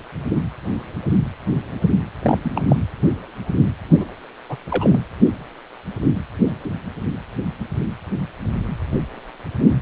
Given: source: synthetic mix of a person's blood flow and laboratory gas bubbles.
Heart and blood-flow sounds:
Doppler ultrasound of blood flow; precordium
2.22-2.38 s: bubbles
2.43-2.52 s: bubbles
2.55-2.62 s: bubbles
2.68-2.76 s: bubbles
4.00-4.04 s: bubbles
4.49-4.57 s: bubbles
4.70-5.01 s: bubbles
From the record:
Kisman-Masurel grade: 222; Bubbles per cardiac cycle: several, 3 to 8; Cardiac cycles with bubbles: 10 to 50%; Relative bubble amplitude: moderate (0.250 to 0.450); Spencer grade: 2 (many but less than half of the cardiac periods contain bubble signals, singularly or in groups); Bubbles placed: anywhere in the cardiac cycle

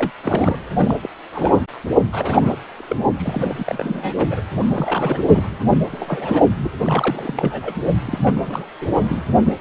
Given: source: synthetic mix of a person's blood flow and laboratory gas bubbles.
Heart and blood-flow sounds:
Doppler ultrasound of blood flow; precordium
0.00-0.10 s: bubbles
0.22-0.58 s: bubbles
0.74-0.97 s: bubbles
1.02-1.10 s: bubbles
1.33-1.52 s: bubbles
1.56-1.60 s: bubbles
2.12-2.56 s: bubbles
2.76-3.01 s: bubbles
3.17-3.65 s: bubbles
3.67-4.13 s: bubbles
4.18-4.26 s: bubbles
4.30-4.41 s: bubbles
4.61-5.22 s: bubbles
5.28-5.58 s: bubbles
5.73-5.78 s: bubbles
5.92-6.42 s: bubbles
6.63-6.70 s: bubbles
6.83-7.74 s: bubbles
8.05-8.18 s: bubbles
8.21-8.65 s: bubbles
8.80-8.87 s: bubbles
9.05-9.22 s: bubbles
9.46-9.53 s: bubbles
From the record:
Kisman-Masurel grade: 342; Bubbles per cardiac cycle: rolling drumbeat, 9 or more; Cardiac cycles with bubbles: 100%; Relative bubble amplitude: moderate (0.250 to 0.450); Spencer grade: 3 (all of the cardiac periods contain showers or single bubble signals, but not dominating or overriding the cardiac motion signals); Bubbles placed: anywhere in the cardiac cycle

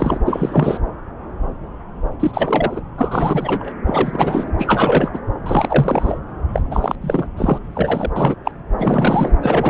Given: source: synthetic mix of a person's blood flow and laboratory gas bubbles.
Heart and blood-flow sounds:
Doppler ultrasound of blood flow; subclavian vein
0.00-0.19 s: bubbles
0.25-0.80 s: bubbles
2.20-2.31 s: bubbles
2.33-2.81 s: bubbles
2.98-3.74 s: bubbles
3.86-4.52 s: bubbles
4.58-5.20 s: bubbles
5.46-6.20 s: bubbles
6.54-6.62 s: bubbles
6.71-6.96 s: bubbles
7.01-7.28 s: bubbles
7.37-7.59 s: bubbles
7.74-8.11 s: bubbles
8.16-8.35 s: bubbles
8.44-8.52 s: bubbles
8.78-9.32 s: bubbles
9.42-9.70 s: bubbles
From the record:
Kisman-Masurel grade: 333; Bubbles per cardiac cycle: rolling drumbeat, 9 or more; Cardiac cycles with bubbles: 50 to 99%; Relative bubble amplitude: loud (0.450 to 0.775); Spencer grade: 3 (all of the cardiac periods contain showers or single bubble signals, but not dominating or overriding the cardiac motion signals); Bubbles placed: anywhere in the cardiac cycle

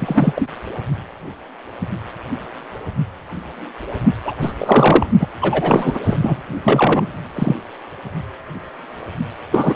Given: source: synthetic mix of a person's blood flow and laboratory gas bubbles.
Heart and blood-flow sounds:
Doppler ultrasound of blood flow; precordium
0.00-0.33 s: bubbles
0.35-0.49 s: bubbles
4.25-4.34 s: bubbles
4.41-4.53 s: bubbles
4.59-5.06 s: bubbles
5.20-5.27 s: bubbles
5.41-6.00 s: bubbles
6.05-6.41 s: bubbles
6.64-7.08 s: bubbles
7.36-7.55 s: bubbles
9.52-9.76 s: bubbles
From the record:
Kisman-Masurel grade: 233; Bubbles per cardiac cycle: several, 3 to 8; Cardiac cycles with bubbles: 50 to 99%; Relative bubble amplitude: loud (0.450 to 0.775); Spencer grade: 3 (all of the cardiac periods contain showers or single bubble signals, but not dominating or overriding the cardiac motion signals); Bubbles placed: only in the low amplitude regions of the cardiac cycle

